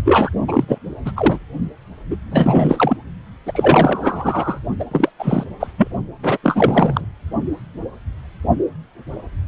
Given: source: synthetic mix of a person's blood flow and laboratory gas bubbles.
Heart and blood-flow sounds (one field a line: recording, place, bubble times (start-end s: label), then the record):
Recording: Doppler ultrasound of blood flow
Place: precordium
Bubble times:
0.05-0.30 s: bubbles
0.47-0.65 s: bubbles
0.67-0.78 s: bubbles
1.05-1.12 s: bubbles
1.17-1.39 s: bubbles
2.10-2.16 s: bubbles
2.31-2.96 s: bubbles
3.46-3.52 s: bubbles
3.55-4.60 s: bubbles
4.79-4.85 s: bubbles
4.91-5.10 s: bubbles
5.19-5.44 s: bubbles
5.60-5.67 s: bubbles
5.78-5.88 s: bubbles
6.23-6.38 s: bubbles
6.43-7.07 s: bubbles
From the record:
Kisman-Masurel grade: 333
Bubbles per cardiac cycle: rolling drumbeat, 9 or more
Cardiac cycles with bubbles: 50 to 99%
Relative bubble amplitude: loud (0.450 to 0.775)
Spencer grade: 3 (all of the cardiac periods contain showers or single bubble signals, but not dominating or overriding the cardiac motion signals)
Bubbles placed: only in the low amplitude regions of the cardiac cycle